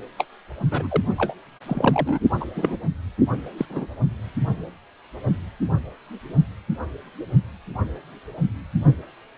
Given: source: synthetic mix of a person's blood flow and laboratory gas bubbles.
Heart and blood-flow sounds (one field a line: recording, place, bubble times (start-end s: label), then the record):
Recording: Doppler ultrasound of blood flow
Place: precordium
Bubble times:
0.18-0.24 s: bubbles
0.70-1.00 s: bubbles
1.17-1.34 s: bubbles
1.67-2.20 s: bubbles
2.41-2.45 s: bubbles
2.56-2.77 s: bubbles
3.58-3.66 s: bubbles
3.70-3.87 s: bubbles
From the record:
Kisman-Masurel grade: 222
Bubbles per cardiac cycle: several, 3 to 8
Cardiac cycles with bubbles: 10 to 50%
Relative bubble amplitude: moderate (0.250 to 0.450)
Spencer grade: 2 (many but less than half of the cardiac periods contain bubble signals, singularly or in groups)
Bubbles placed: only in the low amplitude regions of the cardiac cycle